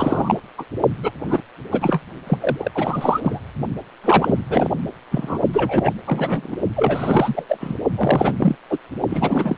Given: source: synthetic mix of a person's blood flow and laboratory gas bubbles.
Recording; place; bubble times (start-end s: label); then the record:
Doppler ultrasound of blood flow; precordium
0.00-0.41 s: bubbles
0.58-0.65 s: bubbles
1.01-1.11 s: bubbles
1.25-1.41 s: bubbles
1.71-2.01 s: bubbles
2.27-2.71 s: bubbles
2.75-3.21 s: bubbles
3.23-3.40 s: bubbles
4.04-4.36 s: bubbles
4.49-4.70 s: bubbles
5.11-5.38 s: bubbles
5.52-5.93 s: bubbles
6.06-6.56 s: bubbles
6.75-7.46 s: bubbles
7.49-7.58 s: bubbles
7.60-7.77 s: bubbles
7.95-8.33 s: bubbles
8.38-8.55 s: bubbles
8.70-8.78 s: bubbles
9.10-9.57 s: bubbles
From the record:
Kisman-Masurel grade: 343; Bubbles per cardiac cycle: rolling drumbeat, 9 or more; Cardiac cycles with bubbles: 100%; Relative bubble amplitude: loud (0.450 to 0.775); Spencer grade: 3 (all of the cardiac periods contain showers or single bubble signals, but not dominating or overriding the cardiac motion signals); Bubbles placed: only in the low amplitude regions of the cardiac cycle